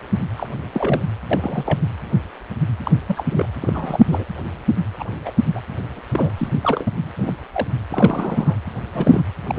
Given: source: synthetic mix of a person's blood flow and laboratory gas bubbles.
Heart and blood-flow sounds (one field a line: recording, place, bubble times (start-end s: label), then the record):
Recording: Doppler ultrasound of blood flow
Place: precordium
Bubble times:
0.36-0.47 s: bubbles
0.73-1.03 s: bubbles
1.30-1.83 s: bubbles
2.85-2.91 s: bubbles
3.06-3.24 s: bubbles
3.29-3.49 s: bubbles
3.61-4.00 s: bubbles
4.08-4.24 s: bubbles
4.99-5.05 s: bubbles
5.25-5.30 s: bubbles
5.54-5.61 s: bubbles
5.95-6.00 s: bubbles
6.12-6.31 s: bubbles
6.38-6.48 s: bubbles
6.62-6.92 s: bubbles
7.19-7.34 s: bubbles
7.53-7.67 s: bubbles
7.88-8.56 s: bubbles
8.93-9.24 s: bubbles
9.47-9.59 s: bubbles
From the record:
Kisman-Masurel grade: 232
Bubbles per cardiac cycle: several, 3 to 8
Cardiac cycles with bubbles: 50 to 99%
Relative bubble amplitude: moderate (0.250 to 0.450)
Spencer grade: 3 (all of the cardiac periods contain showers or single bubble signals, but not dominating or overriding the cardiac motion signals)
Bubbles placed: anywhere in the cardiac cycle